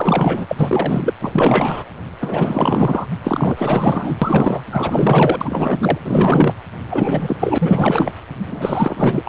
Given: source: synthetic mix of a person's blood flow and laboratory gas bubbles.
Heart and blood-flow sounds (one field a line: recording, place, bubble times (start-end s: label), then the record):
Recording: Doppler ultrasound of blood flow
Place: precordium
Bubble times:
0.00-1.14 s: bubbles
1.21-1.83 s: bubbles
2.21-3.06 s: bubbles
3.23-4.16 s: bubbles
4.21-4.61 s: bubbles
4.71-5.98 s: bubbles
6.04-6.54 s: bubbles
6.90-7.37 s: bubbles
7.39-8.12 s: bubbles
8.46-9.29 s: bubbles
From the record:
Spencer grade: 4 (maximum detectable bubble signal sounding continuously throughout systole and diastole of every cardiac period, and overriding the amplitude of the normal cardiac signals)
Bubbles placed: anywhere in the cardiac cycle